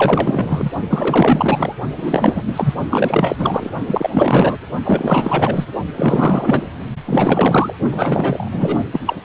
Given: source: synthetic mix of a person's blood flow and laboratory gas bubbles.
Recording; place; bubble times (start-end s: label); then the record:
Doppler ultrasound of blood flow; precordium
0.00-0.71 s: bubbles
0.90-1.75 s: bubbles
1.98-2.43 s: bubbles
2.46-2.75 s: bubbles
2.90-3.70 s: bubbles
3.87-4.10 s: bubbles
4.12-4.58 s: bubbles
4.85-5.66 s: bubbles
5.96-6.71 s: bubbles
7.05-7.73 s: bubbles
7.90-8.84 s: bubbles
8.93-9.00 s: bubbles
9.05-9.16 s: bubbles
From the record:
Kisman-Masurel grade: 444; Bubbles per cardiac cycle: continuous sound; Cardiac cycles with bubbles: 100%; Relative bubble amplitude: maximal (0.775 to 0.999); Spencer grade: 4 (maximum detectable bubble signal sounding continuously throughout systole and diastole of every cardiac period, and overriding the amplitude of the normal cardiac signals); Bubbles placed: only in the low amplitude regions of the cardiac cycle